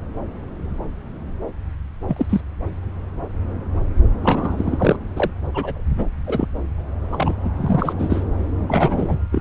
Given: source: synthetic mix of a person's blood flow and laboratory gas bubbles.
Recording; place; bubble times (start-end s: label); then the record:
Doppler ultrasound of blood flow; subclavian vein
2.08-2.26 s: bubbles
2.29-2.41 s: bubbles
4.22-4.97 s: bubbles
5.16-5.30 s: bubbles
5.54-5.81 s: bubbles
5.97-6.06 s: bubbles
6.26-6.46 s: bubbles
7.12-7.33 s: bubbles
7.45-7.50 s: bubbles
7.56-8.24 s: bubbles
8.58-9.19 s: bubbles
9.32-9.41 s: bubbles
From the record:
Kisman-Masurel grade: 232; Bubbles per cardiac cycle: several, 3 to 8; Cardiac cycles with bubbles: 50 to 99%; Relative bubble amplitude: moderate (0.250 to 0.450); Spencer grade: 3 (all of the cardiac periods contain showers or single bubble signals, but not dominating or overriding the cardiac motion signals); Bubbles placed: anywhere in the cardiac cycle